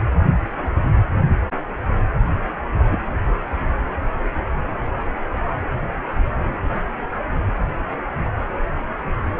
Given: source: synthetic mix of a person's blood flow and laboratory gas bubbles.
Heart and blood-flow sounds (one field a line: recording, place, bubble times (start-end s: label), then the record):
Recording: Doppler ultrasound of blood flow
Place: precordium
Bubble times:
2.91-2.97 s: bubbles
From the record:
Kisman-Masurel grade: 112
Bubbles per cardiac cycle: 1 to 2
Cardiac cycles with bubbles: 1 to 10%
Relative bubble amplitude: moderate (0.250 to 0.450)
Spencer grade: 1 (occasional bubble signal discernible with the cardiac motion signal, with majority of cardiac periods free of bubbles)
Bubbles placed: anywhere in the cardiac cycle